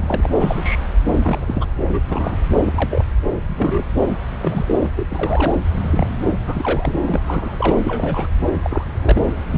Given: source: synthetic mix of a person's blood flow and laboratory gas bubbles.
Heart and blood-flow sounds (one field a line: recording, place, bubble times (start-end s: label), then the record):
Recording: Doppler ultrasound of blood flow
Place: subclavian vein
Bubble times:
0.00-0.27 s: bubbles
0.40-0.84 s: bubbles
1.06-1.19 s: bubbles
1.22-1.67 s: bubbles
1.87-2.00 s: bubbles
2.07-2.37 s: bubbles
2.63-3.05 s: bubbles
3.46-3.83 s: bubbles
4.40-4.89 s: bubbles
4.96-5.06 s: bubbles
5.10-5.56 s: bubbles
5.72-6.09 s: bubbles
6.46-7.00 s: bubbles
7.06-7.77 s: bubbles
7.85-8.28 s: bubbles
8.62-9.21 s: bubbles
9.50-9.58 s: bubbles
From the record:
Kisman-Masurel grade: 232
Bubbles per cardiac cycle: several, 3 to 8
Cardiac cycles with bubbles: 50 to 99%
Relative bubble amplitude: moderate (0.250 to 0.450)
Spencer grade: 3 (all of the cardiac periods contain showers or single bubble signals, but not dominating or overriding the cardiac motion signals)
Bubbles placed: anywhere in the cardiac cycle